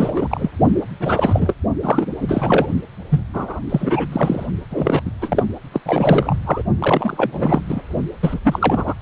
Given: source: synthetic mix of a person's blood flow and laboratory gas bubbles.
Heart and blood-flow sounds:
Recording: Doppler ultrasound of blood flow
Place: precordium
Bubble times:
0.00-0.49 s: bubbles
1.00-1.54 s: bubbles
1.83-2.07 s: bubbles
2.21-2.69 s: bubbles
3.10-3.21 s: bubbles
3.33-3.60 s: bubbles
3.69-4.07 s: bubbles
4.12-4.46 s: bubbles
4.71-5.02 s: bubbles
5.05-5.11 s: bubbles
5.21-5.44 s: bubbles
5.72-5.80 s: bubbles
5.85-6.36 s: bubbles
6.46-6.63 s: bubbles
6.79-7.82 s: bubbles
8.21-8.39 s: bubbles
8.44-8.94 s: bubbles
From the record:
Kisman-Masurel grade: 342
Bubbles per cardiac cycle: rolling drumbeat, 9 or more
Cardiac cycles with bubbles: 100%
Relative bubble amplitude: moderate (0.250 to 0.450)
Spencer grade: 3 (all of the cardiac periods contain showers or single bubble signals, but not dominating or overriding the cardiac motion signals)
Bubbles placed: only in the low amplitude regions of the cardiac cycle

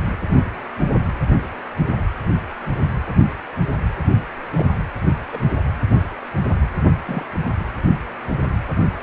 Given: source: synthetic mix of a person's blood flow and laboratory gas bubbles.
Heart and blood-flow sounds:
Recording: Doppler ultrasound of blood flow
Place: precordium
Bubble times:
4.55-4.66 s: bubbles
5.31-5.50 s: bubbles
7.06-7.24 s: bubbles
From the record:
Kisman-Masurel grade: 121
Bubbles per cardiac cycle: 1 to 2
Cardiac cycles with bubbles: 10 to 50%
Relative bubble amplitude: barely perceptible (0.100 to 0.250)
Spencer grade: 2 (many but less than half of the cardiac periods contain bubble signals, singularly or in groups)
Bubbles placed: anywhere in the cardiac cycle

